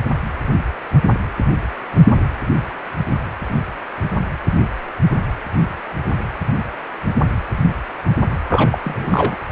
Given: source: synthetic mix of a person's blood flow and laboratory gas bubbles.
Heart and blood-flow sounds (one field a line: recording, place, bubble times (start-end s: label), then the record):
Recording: Doppler ultrasound of blood flow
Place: precordium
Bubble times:
8.49-8.79 s: bubbles
8.84-9.38 s: bubbles
From the record:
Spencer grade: 1 (occasional bubble signal discernible with the cardiac motion signal, with majority of cardiac periods free of bubbles)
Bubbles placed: anywhere in the cardiac cycle